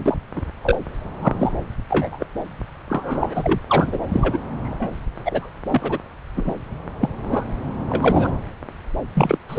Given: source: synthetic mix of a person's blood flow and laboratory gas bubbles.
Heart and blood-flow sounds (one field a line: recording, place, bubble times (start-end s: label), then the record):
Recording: Doppler ultrasound of blood flow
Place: subclavian vein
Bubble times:
0.05-0.17 s: bubbles
0.35-0.42 s: bubbles
0.63-0.77 s: bubbles
1.20-1.35 s: bubbles
1.39-1.52 s: bubbles
1.90-2.27 s: bubbles
2.90-3.60 s: bubbles
3.68-3.99 s: bubbles
4.12-4.38 s: bubbles
4.63-4.94 s: bubbles
5.25-5.50 s: bubbles
5.67-5.99 s: bubbles
6.36-6.55 s: bubbles
7.00-7.09 s: bubbles
7.14-7.48 s: bubbles
7.90-8.31 s: bubbles
9.15-9.38 s: bubbles
9.48-9.59 s: bubbles
From the record:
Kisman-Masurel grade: 242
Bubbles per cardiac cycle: several, 3 to 8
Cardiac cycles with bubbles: 100%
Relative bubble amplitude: moderate (0.250 to 0.450)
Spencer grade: 3 (all of the cardiac periods contain showers or single bubble signals, but not dominating or overriding the cardiac motion signals)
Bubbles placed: anywhere in the cardiac cycle